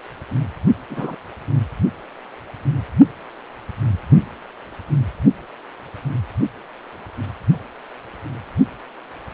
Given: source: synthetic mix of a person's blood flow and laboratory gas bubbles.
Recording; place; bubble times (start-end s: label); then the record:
Doppler ultrasound of blood flow; precordium
0.89-1.15 s: bubbles
From the record:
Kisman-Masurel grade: 112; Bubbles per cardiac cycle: 1 to 2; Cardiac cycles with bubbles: 1 to 10%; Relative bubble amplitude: moderate (0.250 to 0.450); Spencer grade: 1 (occasional bubble signal discernible with the cardiac motion signal, with majority of cardiac periods free of bubbles); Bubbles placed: only in the low amplitude regions of the cardiac cycle